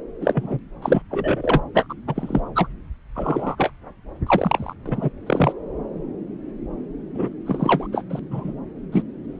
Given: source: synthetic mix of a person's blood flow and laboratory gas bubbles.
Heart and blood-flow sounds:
Doppler ultrasound of blood flow; subclavian vein
0.20-0.59 s: bubbles
0.82-1.02 s: bubbles
1.10-1.61 s: bubbles
1.74-1.87 s: bubbles
1.89-1.94 s: bubbles
2.06-2.41 s: bubbles
2.55-2.67 s: bubbles
3.15-3.71 s: bubbles
4.26-4.74 s: bubbles
4.86-5.09 s: bubbles
5.26-5.53 s: bubbles
7.15-7.29 s: bubbles
7.46-7.87 s: bubbles
7.92-8.03 s: bubbles
8.10-8.19 s: bubbles
8.31-8.53 s: bubbles
8.92-9.02 s: bubbles
From the record:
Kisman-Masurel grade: 233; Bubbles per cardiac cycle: several, 3 to 8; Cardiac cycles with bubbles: 50 to 99%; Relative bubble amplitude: loud (0.450 to 0.775); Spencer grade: 3 (all of the cardiac periods contain showers or single bubble signals, but not dominating or overriding the cardiac motion signals); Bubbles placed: anywhere in the cardiac cycle

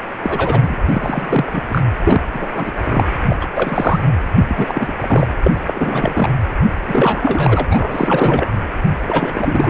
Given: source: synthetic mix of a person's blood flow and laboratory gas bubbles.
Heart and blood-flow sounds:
Doppler ultrasound of blood flow; precordium
0.22-0.75 s: bubbles
0.86-1.64 s: bubbles
1.70-1.83 s: bubbles
2.05-2.22 s: bubbles
2.35-2.47 s: bubbles
2.55-2.72 s: bubbles
2.84-3.08 s: bubbles
3.29-3.37 s: bubbles
3.41-3.47 s: bubbles
3.55-4.00 s: bubbles
4.36-4.45 s: bubbles
4.48-4.96 s: bubbles
5.00-5.27 s: bubbles
5.42-5.52 s: bubbles
5.67-6.29 s: bubbles
6.87-7.67 s: bubbles
7.69-8.52 s: bubbles
9.07-9.69 s: bubbles
From the record:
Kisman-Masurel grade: 343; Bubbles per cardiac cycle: rolling drumbeat, 9 or more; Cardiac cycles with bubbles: 100%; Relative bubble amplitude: loud (0.450 to 0.775); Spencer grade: 3 (all of the cardiac periods contain showers or single bubble signals, but not dominating or overriding the cardiac motion signals); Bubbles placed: anywhere in the cardiac cycle

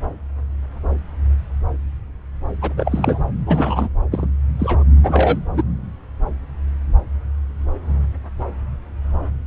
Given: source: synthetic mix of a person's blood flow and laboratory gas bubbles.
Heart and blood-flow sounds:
Doppler ultrasound of blood flow; subclavian vein
2.62-2.73 s: bubbles
2.77-3.20 s: bubbles
3.46-3.88 s: bubbles
4.12-4.27 s: bubbles
4.59-4.83 s: bubbles
5.03-5.39 s: bubbles
5.53-5.62 s: bubbles
From the record:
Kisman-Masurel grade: 222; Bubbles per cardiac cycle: several, 3 to 8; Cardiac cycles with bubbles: 10 to 50%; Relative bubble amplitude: moderate (0.250 to 0.450); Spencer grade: 2 (many but less than half of the cardiac periods contain bubble signals, singularly or in groups); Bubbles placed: anywhere in the cardiac cycle

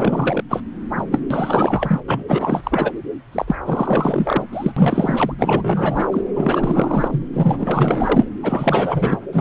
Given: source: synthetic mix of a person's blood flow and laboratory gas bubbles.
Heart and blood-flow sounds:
Doppler ultrasound of blood flow; subclavian vein
0.00-0.42 s: bubbles
0.48-0.62 s: bubbles
0.97-1.04 s: bubbles
1.11-1.20 s: bubbles
1.30-2.00 s: bubbles
2.08-2.23 s: bubbles
2.27-2.92 s: bubbles
3.32-3.56 s: bubbles
3.65-4.43 s: bubbles
4.53-4.71 s: bubbles
4.76-5.33 s: bubbles
5.38-6.21 s: bubbles
6.35-7.29 s: bubbles
7.33-8.25 s: bubbles
8.42-9.20 s: bubbles
9.32-9.41 s: bubbles
From the record:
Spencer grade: 4 (maximum detectable bubble signal sounding continuously throughout systole and diastole of every cardiac period, and overriding the amplitude of the normal cardiac signals); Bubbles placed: anywhere in the cardiac cycle

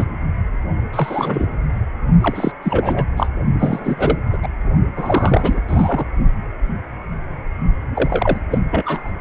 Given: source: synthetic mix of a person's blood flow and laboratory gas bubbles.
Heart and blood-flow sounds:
Doppler ultrasound of blood flow; precordium
0.00-0.05 s: bubbles
0.93-1.48 s: bubbles
2.21-2.52 s: bubbles
2.62-3.07 s: bubbles
3.17-3.29 s: bubbles
3.59-4.18 s: bubbles
4.33-4.38 s: bubbles
4.42-4.48 s: bubbles
4.96-5.61 s: bubbles
5.67-6.05 s: bubbles
7.94-8.40 s: bubbles
8.50-8.62 s: bubbles
8.71-9.10 s: bubbles
From the record:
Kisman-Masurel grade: 333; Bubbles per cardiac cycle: rolling drumbeat, 9 or more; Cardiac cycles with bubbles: 50 to 99%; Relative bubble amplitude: loud (0.450 to 0.775); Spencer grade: 3 (all of the cardiac periods contain showers or single bubble signals, but not dominating or overriding the cardiac motion signals); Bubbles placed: only in the low amplitude regions of the cardiac cycle

